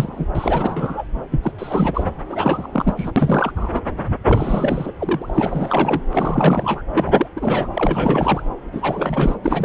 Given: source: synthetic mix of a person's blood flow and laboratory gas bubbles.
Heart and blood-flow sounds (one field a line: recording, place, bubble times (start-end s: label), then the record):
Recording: Doppler ultrasound of blood flow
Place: subclavian vein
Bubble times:
0.00-0.26 s: bubbles
0.35-1.04 s: bubbles
1.31-1.51 s: bubbles
1.58-2.04 s: bubbles
2.29-2.94 s: bubbles
2.97-3.12 s: bubbles
3.16-3.52 s: bubbles
3.56-3.82 s: bubbles
4.25-4.93 s: bubbles
4.99-6.02 s: bubbles
6.12-6.82 s: bubbles
6.93-7.27 s: bubbles
7.36-7.67 s: bubbles
7.74-8.49 s: bubbles
8.72-9.35 s: bubbles
9.42-9.65 s: bubbles
From the record:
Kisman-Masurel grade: 343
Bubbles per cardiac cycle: rolling drumbeat, 9 or more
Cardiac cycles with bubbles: 100%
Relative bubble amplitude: loud (0.450 to 0.775)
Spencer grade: 3 (all of the cardiac periods contain showers or single bubble signals, but not dominating or overriding the cardiac motion signals)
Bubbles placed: anywhere in the cardiac cycle